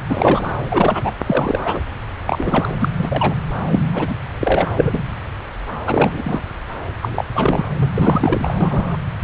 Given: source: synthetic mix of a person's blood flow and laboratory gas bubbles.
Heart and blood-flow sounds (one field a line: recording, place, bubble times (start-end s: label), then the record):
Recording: Doppler ultrasound of blood flow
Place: subclavian vein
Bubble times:
0.08-0.52 s: bubbles
0.69-1.11 s: bubbles
1.24-1.80 s: bubbles
2.25-2.75 s: bubbles
2.81-2.88 s: bubbles
2.98-3.35 s: bubbles
3.71-3.80 s: bubbles
3.93-4.14 s: bubbles
4.43-4.67 s: bubbles
4.76-5.08 s: bubbles
5.86-6.48 s: bubbles
7.01-7.25 s: bubbles
7.33-7.66 s: bubbles
7.79-7.91 s: bubbles
7.94-8.54 s: bubbles
8.61-8.99 s: bubbles
From the record:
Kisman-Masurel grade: 233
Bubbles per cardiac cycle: several, 3 to 8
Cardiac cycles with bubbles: 50 to 99%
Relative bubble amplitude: loud (0.450 to 0.775)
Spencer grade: 3 (all of the cardiac periods contain showers or single bubble signals, but not dominating or overriding the cardiac motion signals)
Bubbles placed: anywhere in the cardiac cycle